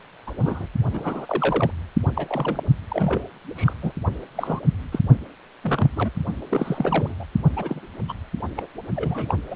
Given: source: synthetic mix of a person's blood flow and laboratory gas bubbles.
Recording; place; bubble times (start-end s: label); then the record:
Doppler ultrasound of blood flow; precordium
0.27-0.32 s: bubbles
0.37-0.66 s: bubbles
0.91-1.71 s: bubbles
2.14-2.61 s: bubbles
2.88-3.27 s: bubbles
3.56-3.74 s: bubbles
3.82-3.92 s: bubbles
4.35-4.60 s: bubbles
4.92-4.99 s: bubbles
5.62-5.90 s: bubbles
5.96-6.11 s: bubbles
6.50-7.15 s: bubbles
7.20-7.25 s: bubbles
7.56-7.80 s: bubbles
8.08-8.12 s: bubbles
8.56-8.69 s: bubbles
8.96-9.37 s: bubbles
9.51-9.56 s: bubbles
From the record:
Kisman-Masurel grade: 242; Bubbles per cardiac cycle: several, 3 to 8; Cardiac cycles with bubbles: 100%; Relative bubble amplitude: moderate (0.250 to 0.450); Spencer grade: 3 (all of the cardiac periods contain showers or single bubble signals, but not dominating or overriding the cardiac motion signals); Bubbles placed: only in the low amplitude regions of the cardiac cycle